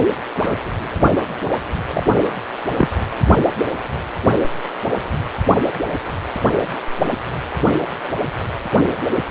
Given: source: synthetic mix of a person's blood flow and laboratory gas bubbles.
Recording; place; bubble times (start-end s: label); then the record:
Doppler ultrasound of blood flow; precordium
0.36-0.58 s: bubbles
1.93-2.04 s: bubbles
2.77-2.89 s: bubbles
From the record:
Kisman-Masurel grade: 122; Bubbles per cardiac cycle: 1 to 2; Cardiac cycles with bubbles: 10 to 50%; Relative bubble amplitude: moderate (0.250 to 0.450); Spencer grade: 2 (many but less than half of the cardiac periods contain bubble signals, singularly or in groups); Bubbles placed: anywhere in the cardiac cycle